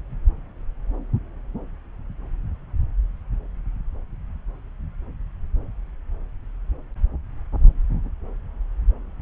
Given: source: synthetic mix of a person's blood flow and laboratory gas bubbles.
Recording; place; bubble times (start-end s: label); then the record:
Doppler ultrasound of blood flow; subclavian vein
no bubbles
From the record:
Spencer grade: 0 (complete lack of bubble signals)